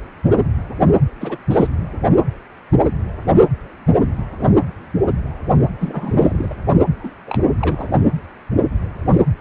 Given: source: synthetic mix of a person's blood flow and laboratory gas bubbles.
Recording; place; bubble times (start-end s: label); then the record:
Doppler ultrasound of blood flow; precordium
1.20-1.37 s: bubbles
1.50-1.67 s: bubbles
5.79-6.56 s: bubbles
6.96-7.10 s: bubbles
7.27-7.43 s: bubbles
7.60-7.88 s: bubbles
From the record:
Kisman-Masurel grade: 222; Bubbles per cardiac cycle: several, 3 to 8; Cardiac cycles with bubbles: 10 to 50%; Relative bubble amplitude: moderate (0.250 to 0.450); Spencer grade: 2 (many but less than half of the cardiac periods contain bubble signals, singularly or in groups); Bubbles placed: only in the low amplitude regions of the cardiac cycle